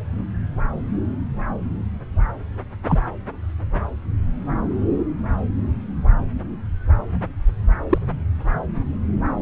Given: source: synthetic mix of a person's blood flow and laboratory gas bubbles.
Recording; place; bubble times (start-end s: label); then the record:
Doppler ultrasound of blood flow; subclavian vein
2.89-2.99 s: bubbles
7.90-7.98 s: bubbles
From the record:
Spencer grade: 2 (many but less than half of the cardiac periods contain bubble signals, singularly or in groups); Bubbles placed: anywhere in the cardiac cycle